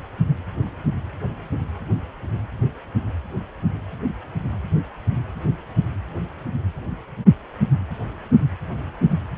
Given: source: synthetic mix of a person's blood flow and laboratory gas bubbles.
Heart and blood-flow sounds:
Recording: Doppler ultrasound of blood flow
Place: precordium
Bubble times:
no bubbles
From the record:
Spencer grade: 0 (complete lack of bubble signals)

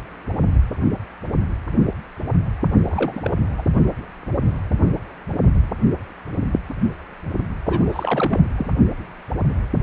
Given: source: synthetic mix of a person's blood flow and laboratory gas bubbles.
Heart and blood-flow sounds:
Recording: Doppler ultrasound of blood flow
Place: precordium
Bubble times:
2.86-3.35 s: bubbles
3.58-3.62 s: bubbles
7.66-8.41 s: bubbles
8.56-8.71 s: bubbles
From the record:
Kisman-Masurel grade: 222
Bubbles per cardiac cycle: several, 3 to 8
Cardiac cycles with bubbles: 10 to 50%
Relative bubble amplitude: moderate (0.250 to 0.450)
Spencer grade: 2 (many but less than half of the cardiac periods contain bubble signals, singularly or in groups)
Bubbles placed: anywhere in the cardiac cycle

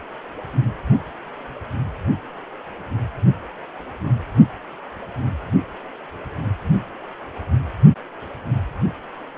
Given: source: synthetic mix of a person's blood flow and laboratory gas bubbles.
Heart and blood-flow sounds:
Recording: Doppler ultrasound of blood flow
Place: precordium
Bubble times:
no bubbles
From the record:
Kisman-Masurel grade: 000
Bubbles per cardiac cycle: 0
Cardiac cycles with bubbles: 0%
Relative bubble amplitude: no bubbles discernible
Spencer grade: 0 (complete lack of bubble signals)

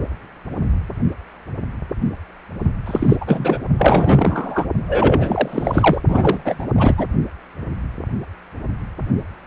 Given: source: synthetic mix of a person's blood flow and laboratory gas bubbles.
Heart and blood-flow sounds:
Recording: Doppler ultrasound of blood flow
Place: precordium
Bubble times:
2.85-3.17 s: bubbles
3.21-3.58 s: bubbles
3.78-4.65 s: bubbles
4.88-6.01 s: bubbles
6.08-6.67 s: bubbles
6.77-6.94 s: bubbles
6.97-7.05 s: bubbles
From the record:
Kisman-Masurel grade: 333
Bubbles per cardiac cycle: rolling drumbeat, 9 or more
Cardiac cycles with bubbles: 50 to 99%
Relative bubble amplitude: loud (0.450 to 0.775)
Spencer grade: 3 (all of the cardiac periods contain showers or single bubble signals, but not dominating or overriding the cardiac motion signals)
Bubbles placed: only in the low amplitude regions of the cardiac cycle

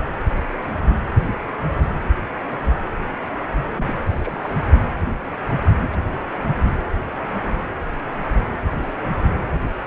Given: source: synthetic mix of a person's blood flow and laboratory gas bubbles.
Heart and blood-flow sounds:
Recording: Doppler ultrasound of blood flow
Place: precordium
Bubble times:
3.77-3.92 s: bubbles
4.06-4.55 s: bubbles
5.49-5.59 s: bubbles
5.81-5.89 s: bubbles
5.91-6.22 s: bubbles
8.72-8.92 s: bubbles
From the record:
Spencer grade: 2 (many but less than half of the cardiac periods contain bubble signals, singularly or in groups)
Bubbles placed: anywhere in the cardiac cycle

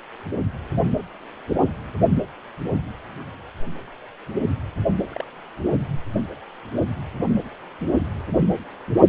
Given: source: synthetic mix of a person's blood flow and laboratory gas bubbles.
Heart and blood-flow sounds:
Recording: Doppler ultrasound of blood flow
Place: precordium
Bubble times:
5.10-5.25 s: bubbles
5.75-5.90 s: bubbles
From the record:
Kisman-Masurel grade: 111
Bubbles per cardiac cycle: 1 to 2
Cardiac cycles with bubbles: 1 to 10%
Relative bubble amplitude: barely perceptible (0.100 to 0.250)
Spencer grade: 1 (occasional bubble signal discernible with the cardiac motion signal, with majority of cardiac periods free of bubbles)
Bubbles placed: anywhere in the cardiac cycle

